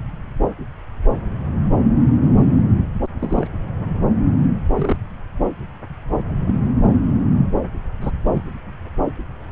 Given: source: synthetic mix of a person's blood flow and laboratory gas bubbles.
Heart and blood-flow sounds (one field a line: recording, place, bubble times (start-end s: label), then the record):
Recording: Doppler ultrasound of blood flow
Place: subclavian vein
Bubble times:
3.19-3.48 s: bubbles
4.76-4.96 s: bubbles
6.41-6.54 s: bubbles
8.01-8.11 s: bubbles
8.34-8.42 s: bubbles
From the record:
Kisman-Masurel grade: 122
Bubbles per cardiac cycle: 1 to 2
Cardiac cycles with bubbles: 10 to 50%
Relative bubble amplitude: moderate (0.250 to 0.450)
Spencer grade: 2 (many but less than half of the cardiac periods contain bubble signals, singularly or in groups)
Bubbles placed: anywhere in the cardiac cycle